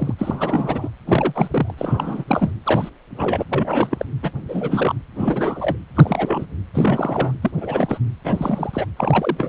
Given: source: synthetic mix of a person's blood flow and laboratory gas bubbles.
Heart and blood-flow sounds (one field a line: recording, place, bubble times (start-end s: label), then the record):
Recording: Doppler ultrasound of blood flow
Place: precordium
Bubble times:
0.00-0.14 s: bubbles
0.18-0.89 s: bubbles
1.05-1.75 s: bubbles
1.77-2.25 s: bubbles
2.27-2.53 s: bubbles
2.63-2.90 s: bubbles
3.10-3.44 s: bubbles
3.49-4.06 s: bubbles
4.23-4.32 s: bubbles
4.48-4.95 s: bubbles
5.15-5.77 s: bubbles
5.96-6.46 s: bubbles
6.74-7.33 s: bubbles
7.42-7.51 s: bubbles
7.57-7.99 s: bubbles
8.24-8.86 s: bubbles
8.96-9.49 s: bubbles
From the record:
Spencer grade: 3 (all of the cardiac periods contain showers or single bubble signals, but not dominating or overriding the cardiac motion signals)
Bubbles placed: anywhere in the cardiac cycle